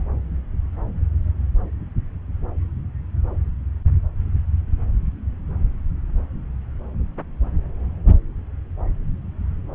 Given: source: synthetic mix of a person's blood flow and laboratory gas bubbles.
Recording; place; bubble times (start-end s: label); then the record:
Doppler ultrasound of blood flow; subclavian vein
no bubbles
From the record:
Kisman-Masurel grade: 000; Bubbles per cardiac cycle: 0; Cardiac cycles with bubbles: 0%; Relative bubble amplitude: no bubbles discernible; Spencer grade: 0 (complete lack of bubble signals)